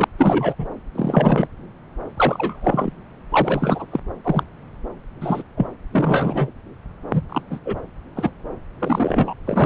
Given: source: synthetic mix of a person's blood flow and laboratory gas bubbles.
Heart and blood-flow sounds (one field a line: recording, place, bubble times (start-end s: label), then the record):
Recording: Doppler ultrasound of blood flow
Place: subclavian vein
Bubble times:
0.00-0.04 s: bubbles
0.18-0.55 s: bubbles
0.58-0.68 s: bubbles
0.95-1.48 s: bubbles
2.17-2.92 s: bubbles
3.30-3.86 s: bubbles
3.92-4.00 s: bubbles
4.24-4.43 s: bubbles
5.21-5.44 s: bubbles
5.57-5.67 s: bubbles
5.93-6.50 s: bubbles
7.10-7.21 s: bubbles
7.29-7.42 s: bubbles
7.50-7.60 s: bubbles
7.65-7.80 s: bubbles
8.15-8.31 s: bubbles
8.79-9.35 s: bubbles
9.45-9.66 s: bubbles
From the record:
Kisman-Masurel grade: 243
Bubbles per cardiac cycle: several, 3 to 8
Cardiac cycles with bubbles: 100%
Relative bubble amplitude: loud (0.450 to 0.775)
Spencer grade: 3 (all of the cardiac periods contain showers or single bubble signals, but not dominating or overriding the cardiac motion signals)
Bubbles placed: anywhere in the cardiac cycle